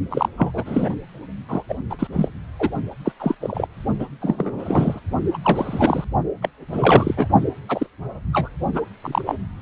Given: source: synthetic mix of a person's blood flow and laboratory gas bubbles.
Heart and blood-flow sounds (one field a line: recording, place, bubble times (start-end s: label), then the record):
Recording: Doppler ultrasound of blood flow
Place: precordium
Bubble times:
0.10-0.28 s: bubbles
0.38-0.95 s: bubbles
1.48-1.63 s: bubbles
1.69-1.78 s: bubbles
1.90-1.96 s: bubbles
1.99-2.08 s: bubbles
2.12-2.29 s: bubbles
2.59-2.70 s: bubbles
3.05-3.12 s: bubbles
3.20-3.35 s: bubbles
3.41-3.67 s: bubbles
3.99-4.06 s: bubbles
4.21-5.00 s: bubbles
5.33-5.38 s: bubbles
5.42-6.04 s: bubbles
6.42-6.49 s: bubbles
6.68-7.27 s: bubbles
7.68-7.86 s: bubbles
8.32-8.50 s: bubbles
8.74-8.81 s: bubbles
9.02-9.21 s: bubbles
9.26-9.37 s: bubbles
From the record:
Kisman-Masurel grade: 242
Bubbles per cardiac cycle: several, 3 to 8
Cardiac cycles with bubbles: 100%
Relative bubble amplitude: moderate (0.250 to 0.450)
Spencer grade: 3 (all of the cardiac periods contain showers or single bubble signals, but not dominating or overriding the cardiac motion signals)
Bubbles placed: only in the low amplitude regions of the cardiac cycle